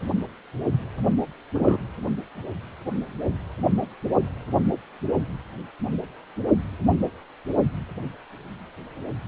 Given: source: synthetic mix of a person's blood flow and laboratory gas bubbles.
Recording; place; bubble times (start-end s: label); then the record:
Doppler ultrasound of blood flow; precordium
1.54-1.77 s: bubbles
From the record:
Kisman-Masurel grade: 112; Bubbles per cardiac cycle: 1 to 2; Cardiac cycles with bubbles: 1 to 10%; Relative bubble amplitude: moderate (0.250 to 0.450); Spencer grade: 1 (occasional bubble signal discernible with the cardiac motion signal, with majority of cardiac periods free of bubbles); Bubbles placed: anywhere in the cardiac cycle